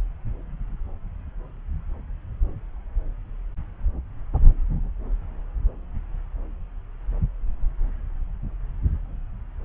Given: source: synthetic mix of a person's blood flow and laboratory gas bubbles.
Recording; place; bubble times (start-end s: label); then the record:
Doppler ultrasound of blood flow; subclavian vein
no bubbles
From the record:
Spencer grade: 0 (complete lack of bubble signals)